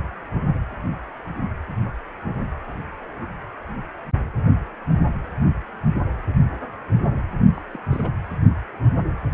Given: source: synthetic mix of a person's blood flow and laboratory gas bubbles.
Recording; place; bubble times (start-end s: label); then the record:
Doppler ultrasound of blood flow; precordium
7.54-7.62 s: bubbles
7.73-7.78 s: bubbles
7.91-8.12 s: bubbles
From the record:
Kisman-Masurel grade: 211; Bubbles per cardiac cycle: several, 3 to 8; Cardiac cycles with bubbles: 1 to 10%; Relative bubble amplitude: barely perceptible (0.100 to 0.250); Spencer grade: 1 (occasional bubble signal discernible with the cardiac motion signal, with majority of cardiac periods free of bubbles); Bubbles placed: anywhere in the cardiac cycle